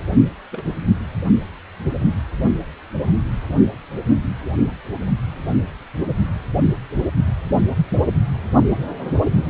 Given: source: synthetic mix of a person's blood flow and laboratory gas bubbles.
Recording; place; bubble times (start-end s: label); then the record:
Doppler ultrasound of blood flow; precordium
0.52-0.65 s: bubbles
From the record:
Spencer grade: 1 (occasional bubble signal discernible with the cardiac motion signal, with majority of cardiac periods free of bubbles); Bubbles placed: only in the low amplitude regions of the cardiac cycle